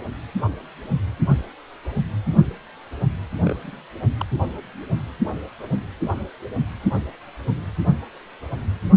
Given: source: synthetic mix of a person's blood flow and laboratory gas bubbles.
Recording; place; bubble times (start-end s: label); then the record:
Doppler ultrasound of blood flow; precordium
3.44-3.56 s: bubbles
3.64-3.81 s: bubbles
4.18-4.25 s: bubbles
From the record:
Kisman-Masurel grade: 211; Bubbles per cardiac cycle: several, 3 to 8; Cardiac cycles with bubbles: 1 to 10%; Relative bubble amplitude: barely perceptible (0.100 to 0.250); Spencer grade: 1 (occasional bubble signal discernible with the cardiac motion signal, with majority of cardiac periods free of bubbles); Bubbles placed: anywhere in the cardiac cycle